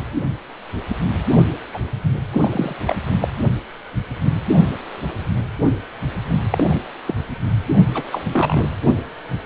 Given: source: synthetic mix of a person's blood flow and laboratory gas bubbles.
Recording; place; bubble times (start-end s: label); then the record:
Doppler ultrasound of blood flow; precordium
1.72-1.79 s: bubbles
2.32-2.75 s: bubbles
2.86-2.95 s: bubbles
3.20-3.28 s: bubbles
6.50-6.86 s: bubbles
7.06-7.15 s: bubbles
7.94-8.03 s: bubbles
8.11-8.22 s: bubbles
8.33-8.69 s: bubbles
From the record:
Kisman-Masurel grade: 223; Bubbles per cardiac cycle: several, 3 to 8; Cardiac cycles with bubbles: 10 to 50%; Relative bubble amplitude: loud (0.450 to 0.775); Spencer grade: 2 (many but less than half of the cardiac periods contain bubble signals, singularly or in groups); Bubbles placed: only in the low amplitude regions of the cardiac cycle